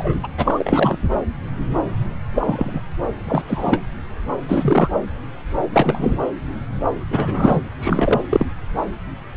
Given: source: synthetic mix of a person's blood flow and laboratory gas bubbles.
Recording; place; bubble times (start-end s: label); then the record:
Doppler ultrasound of blood flow; subclavian vein
0.00-0.14 s: bubbles
0.23-0.28 s: bubbles
0.38-0.97 s: bubbles
2.35-2.81 s: bubbles
3.25-3.43 s: bubbles
3.48-3.82 s: bubbles
4.49-4.90 s: bubbles
5.73-6.13 s: bubbles
7.10-7.62 s: bubbles
7.80-8.22 s: bubbles
8.29-8.46 s: bubbles
From the record:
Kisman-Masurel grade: 232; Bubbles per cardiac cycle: several, 3 to 8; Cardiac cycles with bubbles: 50 to 99%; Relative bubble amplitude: moderate (0.250 to 0.450); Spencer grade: 3 (all of the cardiac periods contain showers or single bubble signals, but not dominating or overriding the cardiac motion signals); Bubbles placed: anywhere in the cardiac cycle